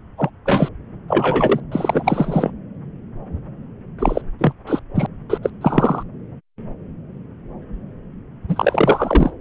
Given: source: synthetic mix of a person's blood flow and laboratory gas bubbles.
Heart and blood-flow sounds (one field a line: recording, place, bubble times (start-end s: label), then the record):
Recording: Doppler ultrasound of blood flow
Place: subclavian vein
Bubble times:
0.17-0.30 s: bubbles
0.45-0.69 s: bubbles
1.08-1.60 s: bubbles
1.71-2.51 s: bubbles
3.99-4.21 s: bubbles
4.39-4.52 s: bubbles
4.67-4.79 s: bubbles
4.95-5.06 s: bubbles
5.29-5.38 s: bubbles
5.42-5.50 s: bubbles
5.61-6.03 s: bubbles
8.49-9.33 s: bubbles
From the record:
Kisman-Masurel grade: 233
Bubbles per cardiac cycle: several, 3 to 8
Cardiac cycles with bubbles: 50 to 99%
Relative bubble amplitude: loud (0.450 to 0.775)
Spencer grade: 3 (all of the cardiac periods contain showers or single bubble signals, but not dominating or overriding the cardiac motion signals)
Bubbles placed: anywhere in the cardiac cycle